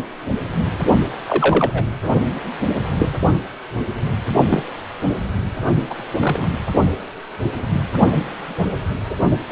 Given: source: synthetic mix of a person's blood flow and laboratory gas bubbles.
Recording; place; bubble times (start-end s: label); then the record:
Doppler ultrasound of blood flow; precordium
1.27-1.86 s: bubbles
2.99-3.09 s: bubbles
4.47-4.63 s: bubbles
5.89-5.95 s: bubbles
6.20-6.56 s: bubbles
From the record:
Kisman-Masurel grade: 122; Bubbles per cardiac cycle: 1 to 2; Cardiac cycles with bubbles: 10 to 50%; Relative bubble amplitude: moderate (0.250 to 0.450); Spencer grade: 2 (many but less than half of the cardiac periods contain bubble signals, singularly or in groups); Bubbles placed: only in the low amplitude regions of the cardiac cycle